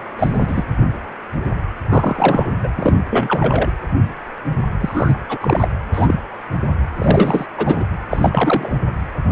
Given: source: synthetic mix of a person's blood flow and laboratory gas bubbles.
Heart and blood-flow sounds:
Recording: Doppler ultrasound of blood flow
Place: precordium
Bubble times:
0.18-0.64 s: bubbles
1.89-2.50 s: bubbles
2.63-2.71 s: bubbles
2.77-2.95 s: bubbles
3.10-3.73 s: bubbles
4.80-5.18 s: bubbles
5.29-5.68 s: bubbles
5.92-6.20 s: bubbles
6.98-7.46 s: bubbles
7.57-7.85 s: bubbles
8.10-8.73 s: bubbles
From the record:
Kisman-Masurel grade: 233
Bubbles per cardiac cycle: several, 3 to 8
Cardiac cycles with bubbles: 50 to 99%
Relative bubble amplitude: loud (0.450 to 0.775)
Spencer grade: 3 (all of the cardiac periods contain showers or single bubble signals, but not dominating or overriding the cardiac motion signals)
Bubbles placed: anywhere in the cardiac cycle

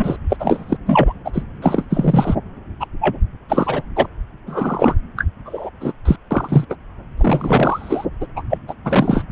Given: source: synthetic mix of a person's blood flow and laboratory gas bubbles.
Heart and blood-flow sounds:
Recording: Doppler ultrasound of blood flow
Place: subclavian vein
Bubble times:
0.00-0.17 s: bubbles
0.30-0.36 s: bubbles
0.39-0.77 s: bubbles
0.86-1.13 s: bubbles
1.24-1.43 s: bubbles
1.62-1.85 s: bubbles
1.90-2.35 s: bubbles
2.80-2.86 s: bubbles
3.00-3.17 s: bubbles
3.48-3.82 s: bubbles
3.95-4.07 s: bubbles
4.46-4.95 s: bubbles
5.17-5.25 s: bubbles
5.46-5.70 s: bubbles
5.81-5.92 s: bubbles
6.05-6.16 s: bubbles
6.31-6.65 s: bubbles
6.70-6.75 s: bubbles
7.17-8.05 s: bubbles
8.20-8.26 s: bubbles
8.36-8.42 s: bubbles
8.49-8.57 s: bubbles
8.67-8.74 s: bubbles
8.84-9.24 s: bubbles
From the record:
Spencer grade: 3 (all of the cardiac periods contain showers or single bubble signals, but not dominating or overriding the cardiac motion signals)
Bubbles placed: anywhere in the cardiac cycle

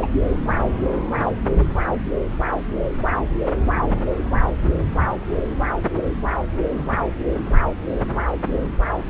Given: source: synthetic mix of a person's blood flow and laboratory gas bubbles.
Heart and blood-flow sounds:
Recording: Doppler ultrasound of blood flow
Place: subclavian vein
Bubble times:
0.02-0.07 s: bubbles
1.23-1.31 s: bubbles
From the record:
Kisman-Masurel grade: 123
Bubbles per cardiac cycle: 1 to 2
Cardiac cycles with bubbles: 10 to 50%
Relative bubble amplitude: loud (0.450 to 0.775)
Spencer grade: 2 (many but less than half of the cardiac periods contain bubble signals, singularly or in groups)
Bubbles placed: anywhere in the cardiac cycle

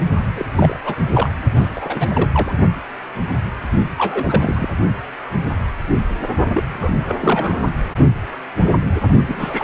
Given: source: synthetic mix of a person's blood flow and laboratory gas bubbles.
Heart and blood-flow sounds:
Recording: Doppler ultrasound of blood flow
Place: precordium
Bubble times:
0.34-0.46 s: bubbles
0.55-0.79 s: bubbles
0.84-0.96 s: bubbles
1.10-1.30 s: bubbles
1.56-1.68 s: bubbles
1.76-2.53 s: bubbles
3.97-4.67 s: bubbles
6.54-6.64 s: bubbles
6.68-6.93 s: bubbles
7.06-7.16 s: bubbles
7.21-7.68 s: bubbles
9.27-9.64 s: bubbles
From the record:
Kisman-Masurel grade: 332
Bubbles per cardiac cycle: rolling drumbeat, 9 or more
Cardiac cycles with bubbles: 50 to 99%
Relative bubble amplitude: moderate (0.250 to 0.450)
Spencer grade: 3 (all of the cardiac periods contain showers or single bubble signals, but not dominating or overriding the cardiac motion signals)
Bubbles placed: only in the low amplitude regions of the cardiac cycle

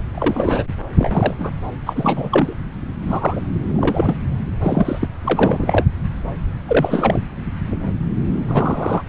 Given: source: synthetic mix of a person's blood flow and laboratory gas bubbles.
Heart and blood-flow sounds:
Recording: Doppler ultrasound of blood flow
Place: subclavian vein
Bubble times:
0.00-0.03 s: bubbles
0.14-0.64 s: bubbles
0.99-1.34 s: bubbles
1.39-1.51 s: bubbles
1.85-2.53 s: bubbles
3.02-3.40 s: bubbles
3.75-4.16 s: bubbles
4.62-5.08 s: bubbles
5.24-5.84 s: bubbles
6.67-7.20 s: bubbles
8.48-9.02 s: bubbles
From the record:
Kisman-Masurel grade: 232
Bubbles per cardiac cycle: several, 3 to 8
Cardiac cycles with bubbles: 50 to 99%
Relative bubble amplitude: moderate (0.250 to 0.450)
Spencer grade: 3 (all of the cardiac periods contain showers or single bubble signals, but not dominating or overriding the cardiac motion signals)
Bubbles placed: anywhere in the cardiac cycle

